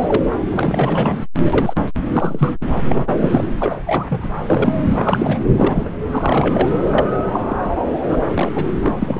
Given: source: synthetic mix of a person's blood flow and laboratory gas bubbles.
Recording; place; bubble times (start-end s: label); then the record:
Doppler ultrasound of blood flow; subclavian vein
0.00-0.23 s: bubbles
0.50-1.20 s: bubbles
1.42-1.75 s: bubbles
2.15-2.52 s: bubbles
2.73-2.81 s: bubbles
2.89-3.15 s: bubbles
3.17-3.44 s: bubbles
3.60-3.75 s: bubbles
3.86-4.29 s: bubbles
4.45-4.74 s: bubbles
4.98-5.40 s: bubbles
5.57-5.92 s: bubbles
6.11-6.75 s: bubbles
6.94-7.05 s: bubbles
7.32-7.42 s: bubbles
7.48-7.56 s: bubbles
7.60-7.71 s: bubbles
8.08-8.18 s: bubbles
8.34-8.52 s: bubbles
8.55-8.66 s: bubbles
8.81-8.93 s: bubbles
9.01-9.20 s: bubbles
From the record:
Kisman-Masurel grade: 232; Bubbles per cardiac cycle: several, 3 to 8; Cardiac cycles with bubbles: 50 to 99%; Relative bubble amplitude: moderate (0.250 to 0.450); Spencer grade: 3 (all of the cardiac periods contain showers or single bubble signals, but not dominating or overriding the cardiac motion signals); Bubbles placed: anywhere in the cardiac cycle